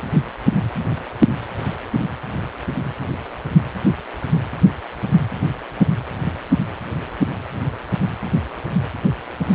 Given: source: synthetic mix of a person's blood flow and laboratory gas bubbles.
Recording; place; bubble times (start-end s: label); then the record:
Doppler ultrasound of blood flow; precordium
no bubbles
From the record:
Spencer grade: 0 (complete lack of bubble signals)